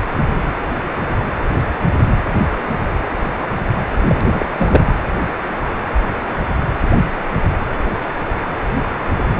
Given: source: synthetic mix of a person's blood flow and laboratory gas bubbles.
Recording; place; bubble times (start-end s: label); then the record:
Doppler ultrasound of blood flow; precordium
4.05-4.46 s: bubbles
4.56-4.95 s: bubbles
From the record:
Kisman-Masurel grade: 212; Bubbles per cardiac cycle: several, 3 to 8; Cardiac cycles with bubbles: 1 to 10%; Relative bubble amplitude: moderate (0.250 to 0.450); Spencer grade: 1 (occasional bubble signal discernible with the cardiac motion signal, with majority of cardiac periods free of bubbles); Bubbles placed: anywhere in the cardiac cycle